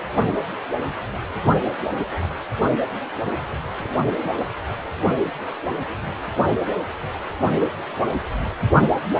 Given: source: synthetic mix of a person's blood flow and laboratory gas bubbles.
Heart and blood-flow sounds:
Doppler ultrasound of blood flow; precordium
2.20-2.35 s: bubbles
3.65-3.90 s: bubbles
4.21-4.34 s: bubbles
5.18-5.23 s: bubbles
From the record:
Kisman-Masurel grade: 121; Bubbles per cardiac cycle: 1 to 2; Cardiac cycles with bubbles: 10 to 50%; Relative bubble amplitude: barely perceptible (0.100 to 0.250); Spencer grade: 2 (many but less than half of the cardiac periods contain bubble signals, singularly or in groups); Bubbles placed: only in the low amplitude regions of the cardiac cycle

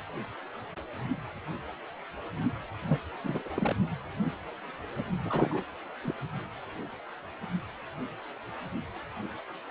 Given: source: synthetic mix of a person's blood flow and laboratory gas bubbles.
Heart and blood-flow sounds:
Doppler ultrasound of blood flow; precordium
2.82-2.98 s: bubbles
3.24-3.75 s: bubbles
5.23-5.62 s: bubbles
6.03-6.14 s: bubbles
From the record:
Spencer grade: 2 (many but less than half of the cardiac periods contain bubble signals, singularly or in groups); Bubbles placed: only in the low amplitude regions of the cardiac cycle

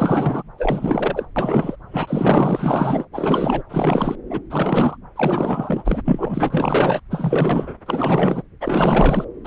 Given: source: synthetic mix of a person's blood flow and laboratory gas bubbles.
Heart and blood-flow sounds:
Doppler ultrasound of blood flow; subclavian vein
0.00-0.43 s: bubbles
0.57-1.25 s: bubbles
1.36-1.76 s: bubbles
1.91-3.06 s: bubbles
3.12-3.62 s: bubbles
3.69-4.16 s: bubbles
4.30-4.40 s: bubbles
4.50-4.97 s: bubbles
5.16-6.02 s: bubbles
6.05-7.00 s: bubbles
7.11-7.75 s: bubbles
7.86-8.42 s: bubbles
8.60-9.24 s: bubbles
9.44-9.47 s: bubbles
From the record:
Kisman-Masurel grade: 444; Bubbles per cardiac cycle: continuous sound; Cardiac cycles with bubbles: 100%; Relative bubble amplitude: maximal (0.775 to 0.999); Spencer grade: 4 (maximum detectable bubble signal sounding continuously throughout systole and diastole of every cardiac period, and overriding the amplitude of the normal cardiac signals); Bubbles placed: anywhere in the cardiac cycle

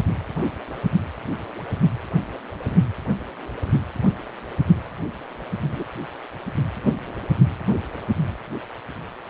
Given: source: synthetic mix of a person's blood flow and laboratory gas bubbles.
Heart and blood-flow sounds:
Doppler ultrasound of blood flow; precordium
5.71-5.83 s: bubbles
From the record:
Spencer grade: 1 (occasional bubble signal discernible with the cardiac motion signal, with majority of cardiac periods free of bubbles); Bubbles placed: anywhere in the cardiac cycle

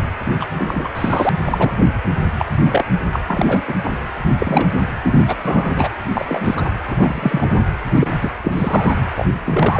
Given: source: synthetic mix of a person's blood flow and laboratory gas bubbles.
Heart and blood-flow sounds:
Doppler ultrasound of blood flow; precordium
0.00-0.03 s: bubbles
0.39-0.47 s: bubbles
0.58-0.89 s: bubbles
0.95-1.29 s: bubbles
1.45-1.72 s: bubbles
1.76-1.86 s: bubbles
2.39-2.46 s: bubbles
2.64-2.85 s: bubbles
3.12-3.20 s: bubbles
3.28-3.62 s: bubbles
3.67-3.75 s: bubbles
3.84-3.92 s: bubbles
4.39-4.75 s: bubbles
5.03-5.24 s: bubbles
5.28-5.35 s: bubbles
5.44-5.88 s: bubbles
6.13-6.25 s: bubbles
6.28-6.70 s: bubbles
6.87-7.46 s: bubbles
7.50-7.60 s: bubbles
7.95-8.12 s: bubbles
8.21-8.33 s: bubbles
8.44-8.94 s: bubbles
9.15-9.26 s: bubbles
9.45-9.80 s: bubbles
From the record:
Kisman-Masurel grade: 243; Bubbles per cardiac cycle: several, 3 to 8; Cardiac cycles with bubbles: 100%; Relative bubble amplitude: loud (0.450 to 0.775); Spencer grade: 3 (all of the cardiac periods contain showers or single bubble signals, but not dominating or overriding the cardiac motion signals); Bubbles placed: anywhere in the cardiac cycle

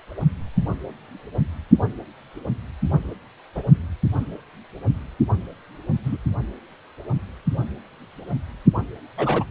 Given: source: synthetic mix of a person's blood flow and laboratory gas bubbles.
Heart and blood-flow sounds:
Doppler ultrasound of blood flow; precordium
3.55-3.63 s: bubbles
6.03-6.17 s: bubbles
9.17-9.44 s: bubbles
From the record:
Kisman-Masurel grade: 122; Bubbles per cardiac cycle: 1 to 2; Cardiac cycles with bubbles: 10 to 50%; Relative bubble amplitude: moderate (0.250 to 0.450); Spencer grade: 2 (many but less than half of the cardiac periods contain bubble signals, singularly or in groups); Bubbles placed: only in the low amplitude regions of the cardiac cycle

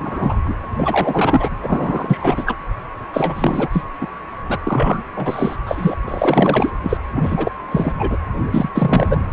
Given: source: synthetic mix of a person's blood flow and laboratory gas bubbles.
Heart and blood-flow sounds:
Doppler ultrasound of blood flow; precordium
0.00-0.37 s: bubbles
0.44-0.55 s: bubbles
0.77-1.50 s: bubbles
1.62-2.57 s: bubbles
3.13-3.69 s: bubbles
3.73-3.85 s: bubbles
4.01-4.07 s: bubbles
4.49-4.58 s: bubbles
4.64-5.03 s: bubbles
5.16-5.56 s: bubbles
5.66-5.96 s: bubbles
6.07-6.70 s: bubbles
6.83-6.98 s: bubbles
7.12-7.52 s: bubbles
7.71-7.93 s: bubbles
7.99-8.18 s: bubbles
8.51-8.69 s: bubbles
8.74-9.25 s: bubbles
9.31-9.33 s: bubbles
From the record:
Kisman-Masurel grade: 343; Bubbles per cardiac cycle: rolling drumbeat, 9 or more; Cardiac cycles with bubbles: 100%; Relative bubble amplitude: loud (0.450 to 0.775); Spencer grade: 3 (all of the cardiac periods contain showers or single bubble signals, but not dominating or overriding the cardiac motion signals); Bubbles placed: anywhere in the cardiac cycle

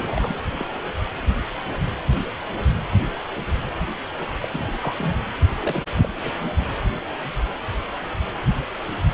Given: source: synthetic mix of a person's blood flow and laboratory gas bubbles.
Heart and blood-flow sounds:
Doppler ultrasound of blood flow; precordium
0.00-0.40 s: bubbles
0.57-0.66 s: bubbles
4.43-4.48 s: bubbles
4.52-4.65 s: bubbles
4.67-4.71 s: bubbles
4.81-4.95 s: bubbles
4.99-5.15 s: bubbles
5.62-5.84 s: bubbles
5.90-6.08 s: bubbles
6.16-6.32 s: bubbles
From the record:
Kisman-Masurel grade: 221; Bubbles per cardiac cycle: several, 3 to 8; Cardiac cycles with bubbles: 10 to 50%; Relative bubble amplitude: barely perceptible (0.100 to 0.250); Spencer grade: 2 (many but less than half of the cardiac periods contain bubble signals, singularly or in groups); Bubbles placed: anywhere in the cardiac cycle

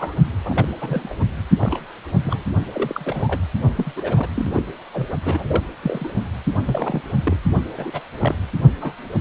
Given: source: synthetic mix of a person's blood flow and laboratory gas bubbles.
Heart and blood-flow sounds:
Doppler ultrasound of blood flow; precordium
0.00-0.15 s: bubbles
0.45-0.67 s: bubbles
0.81-1.14 s: bubbles
1.61-1.93 s: bubbles
2.24-2.43 s: bubbles
2.72-3.42 s: bubbles
3.75-3.92 s: bubbles
3.96-4.29 s: bubbles
4.35-4.62 s: bubbles
4.93-5.08 s: bubbles
5.25-5.61 s: bubbles
5.83-6.08 s: bubbles
6.65-7.01 s: bubbles
7.23-7.37 s: bubbles
7.77-8.00 s: bubbles
8.19-8.35 s: bubbles
8.81-8.94 s: bubbles
From the record:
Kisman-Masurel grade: 242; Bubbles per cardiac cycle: several, 3 to 8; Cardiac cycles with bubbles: 100%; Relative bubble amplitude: moderate (0.250 to 0.450); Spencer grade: 3 (all of the cardiac periods contain showers or single bubble signals, but not dominating or overriding the cardiac motion signals); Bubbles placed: only in the low amplitude regions of the cardiac cycle

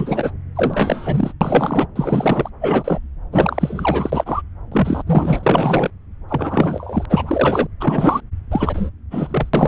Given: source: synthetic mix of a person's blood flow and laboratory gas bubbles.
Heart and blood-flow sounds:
Doppler ultrasound of blood flow; subclavian vein
0.00-0.31 s: bubbles
0.55-1.32 s: bubbles
1.41-1.87 s: bubbles
1.95-2.50 s: bubbles
2.61-3.00 s: bubbles
3.32-4.42 s: bubbles
4.71-5.03 s: bubbles
5.07-5.90 s: bubbles
6.29-7.06 s: bubbles
7.09-7.67 s: bubbles
7.80-8.21 s: bubbles
8.50-8.89 s: bubbles
9.11-9.49 s: bubbles
9.53-9.68 s: bubbles
From the record:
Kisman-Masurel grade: 343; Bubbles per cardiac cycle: rolling drumbeat, 9 or more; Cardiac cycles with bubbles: 100%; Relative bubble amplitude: loud (0.450 to 0.775); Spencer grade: 3 (all of the cardiac periods contain showers or single bubble signals, but not dominating or overriding the cardiac motion signals); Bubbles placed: anywhere in the cardiac cycle

